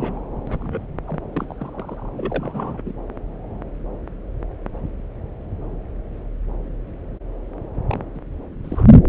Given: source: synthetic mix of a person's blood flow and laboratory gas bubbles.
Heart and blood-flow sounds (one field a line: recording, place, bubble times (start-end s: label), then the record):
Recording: Doppler ultrasound of blood flow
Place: subclavian vein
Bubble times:
0.00-0.19 s: bubbles
0.47-0.86 s: bubbles
1.07-1.20 s: bubbles
1.33-1.46 s: bubbles
1.50-1.54 s: bubbles
1.58-2.09 s: bubbles
2.17-2.81 s: bubbles
2.85-2.94 s: bubbles
7.87-7.98 s: bubbles
8.15-8.20 s: bubbles
8.64-8.92 s: bubbles
From the record:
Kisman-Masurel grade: 221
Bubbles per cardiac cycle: several, 3 to 8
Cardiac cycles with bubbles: 10 to 50%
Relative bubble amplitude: barely perceptible (0.100 to 0.250)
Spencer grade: 2 (many but less than half of the cardiac periods contain bubble signals, singularly or in groups)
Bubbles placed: anywhere in the cardiac cycle